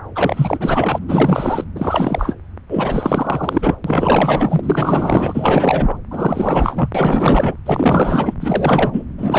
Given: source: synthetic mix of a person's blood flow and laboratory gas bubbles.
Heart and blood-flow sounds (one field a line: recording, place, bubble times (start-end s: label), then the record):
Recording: Doppler ultrasound of blood flow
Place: subclavian vein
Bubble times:
0.15-0.99 s: bubbles
1.08-1.64 s: bubbles
1.75-2.35 s: bubbles
2.69-3.75 s: bubbles
3.84-5.97 s: bubbles
6.11-6.89 s: bubbles
6.94-7.56 s: bubbles
7.66-8.34 s: bubbles
8.41-9.03 s: bubbles
9.18-9.38 s: bubbles
From the record:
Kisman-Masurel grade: 444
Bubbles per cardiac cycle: continuous sound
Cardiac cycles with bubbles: 100%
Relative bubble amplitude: maximal (0.775 to 0.999)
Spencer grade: 4 (maximum detectable bubble signal sounding continuously throughout systole and diastole of every cardiac period, and overriding the amplitude of the normal cardiac signals)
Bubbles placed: anywhere in the cardiac cycle